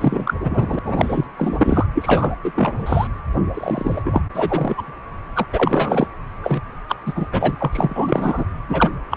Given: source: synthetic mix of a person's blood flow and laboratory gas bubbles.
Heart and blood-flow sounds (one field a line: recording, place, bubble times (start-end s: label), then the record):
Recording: Doppler ultrasound of blood flow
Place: precordium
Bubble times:
0.00-0.79 s: bubbles
0.84-1.25 s: bubbles
1.37-1.87 s: bubbles
1.95-2.32 s: bubbles
2.44-2.52 s: bubbles
2.55-3.08 s: bubbles
3.54-4.02 s: bubbles
4.05-4.21 s: bubbles
4.33-4.94 s: bubbles
5.34-5.46 s: bubbles
5.52-6.07 s: bubbles
6.43-6.62 s: bubbles
6.89-6.95 s: bubbles
7.05-7.26 s: bubbles
7.31-8.44 s: bubbles
8.69-8.90 s: bubbles
9.10-9.17 s: bubbles
From the record:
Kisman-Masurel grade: 343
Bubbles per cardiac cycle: rolling drumbeat, 9 or more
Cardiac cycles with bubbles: 100%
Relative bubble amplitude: loud (0.450 to 0.775)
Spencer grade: 3 (all of the cardiac periods contain showers or single bubble signals, but not dominating or overriding the cardiac motion signals)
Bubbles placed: anywhere in the cardiac cycle